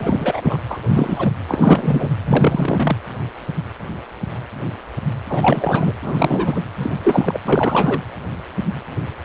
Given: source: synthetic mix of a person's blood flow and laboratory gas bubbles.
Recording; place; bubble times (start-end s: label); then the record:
Doppler ultrasound of blood flow; precordium
0.00-0.58 s: bubbles
0.71-0.79 s: bubbles
0.84-1.33 s: bubbles
1.48-2.09 s: bubbles
2.25-2.97 s: bubbles
5.29-5.93 s: bubbles
6.02-6.60 s: bubbles
6.79-7.38 s: bubbles
7.45-8.01 s: bubbles
From the record:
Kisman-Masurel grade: 333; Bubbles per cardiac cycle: rolling drumbeat, 9 or more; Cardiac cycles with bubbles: 50 to 99%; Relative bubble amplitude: loud (0.450 to 0.775); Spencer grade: 3 (all of the cardiac periods contain showers or single bubble signals, but not dominating or overriding the cardiac motion signals); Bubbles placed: anywhere in the cardiac cycle